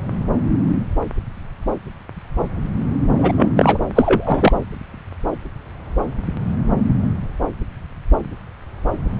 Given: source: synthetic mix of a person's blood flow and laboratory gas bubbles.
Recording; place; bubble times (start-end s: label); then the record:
Doppler ultrasound of blood flow; subclavian vein
3.18-3.32 s: bubbles
3.37-3.52 s: bubbles
3.56-3.78 s: bubbles
3.94-4.52 s: bubbles
From the record:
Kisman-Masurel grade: 223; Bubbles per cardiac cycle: several, 3 to 8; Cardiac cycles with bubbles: 10 to 50%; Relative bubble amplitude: loud (0.450 to 0.775); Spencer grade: 2 (many but less than half of the cardiac periods contain bubble signals, singularly or in groups); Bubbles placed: anywhere in the cardiac cycle